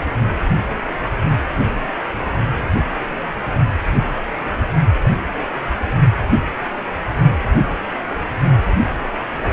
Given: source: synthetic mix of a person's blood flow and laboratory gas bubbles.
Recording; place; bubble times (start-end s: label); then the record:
Doppler ultrasound of blood flow; precordium
no bubbles
From the record:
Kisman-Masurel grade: 000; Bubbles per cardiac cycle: 0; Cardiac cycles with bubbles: 0%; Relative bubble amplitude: no bubbles discernible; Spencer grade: 0 (complete lack of bubble signals)